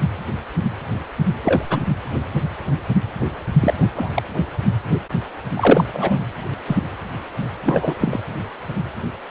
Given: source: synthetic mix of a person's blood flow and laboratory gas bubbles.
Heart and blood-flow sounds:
Doppler ultrasound of blood flow; precordium
1.44-1.64 s: bubbles
1.69-1.81 s: bubbles
3.60-3.74 s: bubbles
3.78-3.91 s: bubbles
3.96-4.22 s: bubbles
5.56-5.84 s: bubbles
5.92-6.21 s: bubbles
6.54-6.56 s: bubbles
6.67-6.77 s: bubbles
7.65-8.20 s: bubbles
From the record:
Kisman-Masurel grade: 223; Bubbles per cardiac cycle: several, 3 to 8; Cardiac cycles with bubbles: 10 to 50%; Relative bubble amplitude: loud (0.450 to 0.775); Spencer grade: 2 (many but less than half of the cardiac periods contain bubble signals, singularly or in groups); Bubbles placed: anywhere in the cardiac cycle

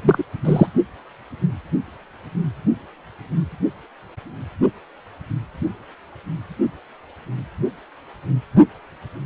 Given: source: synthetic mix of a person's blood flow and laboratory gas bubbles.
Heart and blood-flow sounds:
Doppler ultrasound of blood flow; precordium
0.02-0.23 s: bubbles
0.45-0.67 s: bubbles
From the record:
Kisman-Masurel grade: 113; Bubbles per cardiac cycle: 1 to 2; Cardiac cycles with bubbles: 1 to 10%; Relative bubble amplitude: loud (0.450 to 0.775); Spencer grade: 1 (occasional bubble signal discernible with the cardiac motion signal, with majority of cardiac periods free of bubbles); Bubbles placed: only in the low amplitude regions of the cardiac cycle

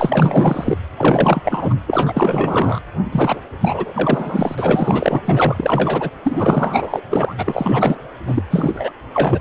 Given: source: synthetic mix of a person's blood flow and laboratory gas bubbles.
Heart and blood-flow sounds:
Doppler ultrasound of blood flow; precordium
0.00-0.77 s: bubbles
0.97-1.76 s: bubbles
1.86-2.80 s: bubbles
3.11-3.40 s: bubbles
3.60-4.55 s: bubbles
4.58-5.21 s: bubbles
5.25-6.10 s: bubbles
6.24-7.01 s: bubbles
7.10-7.35 s: bubbles
7.38-7.97 s: bubbles
8.26-8.42 s: bubbles
8.50-8.91 s: bubbles
9.12-9.39 s: bubbles
From the record:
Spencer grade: 4 (maximum detectable bubble signal sounding continuously throughout systole and diastole of every cardiac period, and overriding the amplitude of the normal cardiac signals); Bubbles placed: anywhere in the cardiac cycle

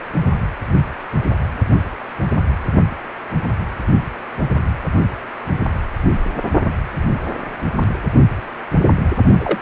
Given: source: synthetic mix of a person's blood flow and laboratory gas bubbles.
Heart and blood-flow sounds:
Doppler ultrasound of blood flow; precordium
9.39-9.58 s: bubbles
From the record:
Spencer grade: 1 (occasional bubble signal discernible with the cardiac motion signal, with majority of cardiac periods free of bubbles); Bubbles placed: only in the low amplitude regions of the cardiac cycle

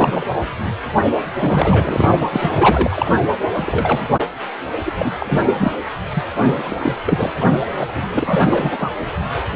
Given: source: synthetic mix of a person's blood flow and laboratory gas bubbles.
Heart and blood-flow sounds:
Doppler ultrasound of blood flow; precordium
0.00-0.27 s: bubbles
1.39-2.08 s: bubbles
2.19-2.28 s: bubbles
2.31-3.11 s: bubbles
3.55-4.02 s: bubbles
4.11-4.19 s: bubbles
4.85-4.92 s: bubbles
4.98-5.17 s: bubbles
5.20-5.74 s: bubbles
6.14-6.24 s: bubbles
6.35-6.93 s: bubbles
7.06-7.31 s: bubbles
7.38-7.52 s: bubbles
7.73-8.92 s: bubbles
9.52-9.56 s: bubbles
From the record:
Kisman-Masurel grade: 333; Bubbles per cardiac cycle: rolling drumbeat, 9 or more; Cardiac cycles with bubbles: 50 to 99%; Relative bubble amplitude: loud (0.450 to 0.775); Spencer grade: 3 (all of the cardiac periods contain showers or single bubble signals, but not dominating or overriding the cardiac motion signals); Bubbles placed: anywhere in the cardiac cycle

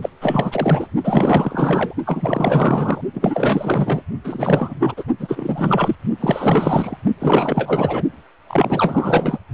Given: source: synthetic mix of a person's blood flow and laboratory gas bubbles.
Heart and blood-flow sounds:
Doppler ultrasound of blood flow; precordium
0.01-0.10 s: bubbles
0.21-0.87 s: bubbles
1.03-1.94 s: bubbles
2.05-3.02 s: bubbles
3.13-4.03 s: bubbles
4.24-4.74 s: bubbles
4.80-5.04 s: bubbles
5.19-5.96 s: bubbles
6.20-6.97 s: bubbles
7.19-8.03 s: bubbles
8.48-9.38 s: bubbles
From the record:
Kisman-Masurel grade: 444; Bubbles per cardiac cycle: continuous sound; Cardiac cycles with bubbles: 100%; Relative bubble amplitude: maximal (0.775 to 0.999); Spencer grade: 4 (maximum detectable bubble signal sounding continuously throughout systole and diastole of every cardiac period, and overriding the amplitude of the normal cardiac signals); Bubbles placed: only in the low amplitude regions of the cardiac cycle

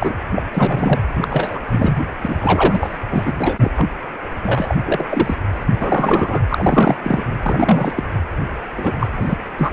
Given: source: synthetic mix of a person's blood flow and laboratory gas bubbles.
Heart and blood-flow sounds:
Doppler ultrasound of blood flow; precordium
0.00-0.15 s: bubbles
0.35-0.43 s: bubbles
0.54-1.01 s: bubbles
1.14-1.59 s: bubbles
1.71-1.98 s: bubbles
2.21-2.96 s: bubbles
3.10-3.71 s: bubbles
3.75-3.88 s: bubbles
4.43-4.77 s: bubbles
4.84-5.05 s: bubbles
5.09-5.36 s: bubbles
5.66-6.41 s: bubbles
6.49-6.98 s: bubbles
7.03-7.25 s: bubbles
7.43-7.93 s: bubbles
7.95-8.04 s: bubbles
8.76-8.96 s: bubbles
9.00-9.09 s: bubbles
9.16-9.37 s: bubbles
9.57-9.73 s: bubbles
From the record:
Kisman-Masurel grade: 333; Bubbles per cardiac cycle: rolling drumbeat, 9 or more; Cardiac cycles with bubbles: 50 to 99%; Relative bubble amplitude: loud (0.450 to 0.775); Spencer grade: 3 (all of the cardiac periods contain showers or single bubble signals, but not dominating or overriding the cardiac motion signals); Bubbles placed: anywhere in the cardiac cycle

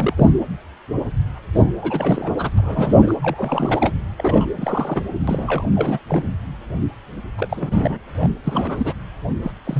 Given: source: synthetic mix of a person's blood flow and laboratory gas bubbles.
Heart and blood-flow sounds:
Doppler ultrasound of blood flow; precordium
0.00-0.14 s: bubbles
0.17-0.30 s: bubbles
1.55-1.71 s: bubbles
1.81-2.34 s: bubbles
2.38-2.50 s: bubbles
2.58-3.15 s: bubbles
3.23-3.94 s: bubbles
4.17-4.47 s: bubbles
4.57-5.02 s: bubbles
5.27-5.67 s: bubbles
5.75-5.99 s: bubbles
6.08-6.28 s: bubbles
7.38-7.99 s: bubbles
8.21-8.32 s: bubbles
8.44-8.94 s: bubbles
9.42-9.52 s: bubbles
9.64-9.80 s: bubbles
From the record:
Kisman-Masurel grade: 332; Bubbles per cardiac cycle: rolling drumbeat, 9 or more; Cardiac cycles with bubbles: 50 to 99%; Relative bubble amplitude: moderate (0.250 to 0.450); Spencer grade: 3 (all of the cardiac periods contain showers or single bubble signals, but not dominating or overriding the cardiac motion signals); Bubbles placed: anywhere in the cardiac cycle

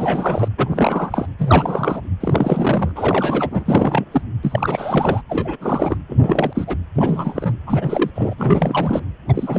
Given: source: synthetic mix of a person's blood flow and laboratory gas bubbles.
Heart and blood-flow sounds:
Doppler ultrasound of blood flow; precordium
0.00-0.48 s: bubbles
0.57-1.27 s: bubbles
1.38-2.01 s: bubbles
2.20-2.92 s: bubbles
2.96-4.04 s: bubbles
4.11-4.21 s: bubbles
4.42-5.21 s: bubbles
5.29-5.56 s: bubbles
5.61-5.97 s: bubbles
6.09-6.77 s: bubbles
6.95-7.53 s: bubbles
7.67-8.10 s: bubbles
8.14-8.34 s: bubbles
8.37-9.01 s: bubbles
9.28-9.59 s: bubbles
From the record:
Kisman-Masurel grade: 342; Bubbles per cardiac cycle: rolling drumbeat, 9 or more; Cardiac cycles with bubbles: 100%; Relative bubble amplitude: moderate (0.250 to 0.450); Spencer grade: 3 (all of the cardiac periods contain showers or single bubble signals, but not dominating or overriding the cardiac motion signals); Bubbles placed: anywhere in the cardiac cycle

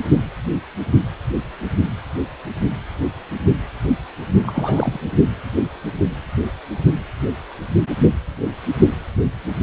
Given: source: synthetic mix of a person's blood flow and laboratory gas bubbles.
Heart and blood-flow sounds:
Doppler ultrasound of blood flow; precordium
4.43-4.98 s: bubbles
From the record:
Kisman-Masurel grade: 212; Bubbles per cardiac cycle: several, 3 to 8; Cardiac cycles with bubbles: 1 to 10%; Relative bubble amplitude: moderate (0.250 to 0.450); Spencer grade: 1 (occasional bubble signal discernible with the cardiac motion signal, with majority of cardiac periods free of bubbles); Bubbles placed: only in the low amplitude regions of the cardiac cycle

